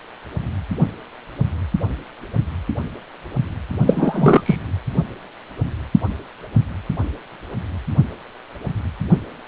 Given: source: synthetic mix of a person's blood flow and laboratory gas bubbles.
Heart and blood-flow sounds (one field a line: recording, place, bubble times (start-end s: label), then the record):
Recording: Doppler ultrasound of blood flow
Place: precordium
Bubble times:
3.86-4.42 s: bubbles
4.46-4.56 s: bubbles
From the record:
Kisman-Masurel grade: 213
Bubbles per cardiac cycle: several, 3 to 8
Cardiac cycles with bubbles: 1 to 10%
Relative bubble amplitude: loud (0.450 to 0.775)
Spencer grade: 1 (occasional bubble signal discernible with the cardiac motion signal, with majority of cardiac periods free of bubbles)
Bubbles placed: only in the low amplitude regions of the cardiac cycle